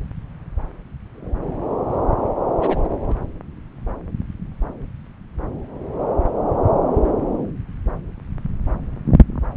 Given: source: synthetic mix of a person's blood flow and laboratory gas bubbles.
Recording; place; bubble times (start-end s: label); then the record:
Doppler ultrasound of blood flow; subclavian vein
2.59-2.81 s: bubbles
3.03-3.24 s: bubbles
From the record:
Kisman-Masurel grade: 211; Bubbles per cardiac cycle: several, 3 to 8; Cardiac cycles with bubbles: 1 to 10%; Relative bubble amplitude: barely perceptible (0.100 to 0.250); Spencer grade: 1 (occasional bubble signal discernible with the cardiac motion signal, with majority of cardiac periods free of bubbles); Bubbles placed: anywhere in the cardiac cycle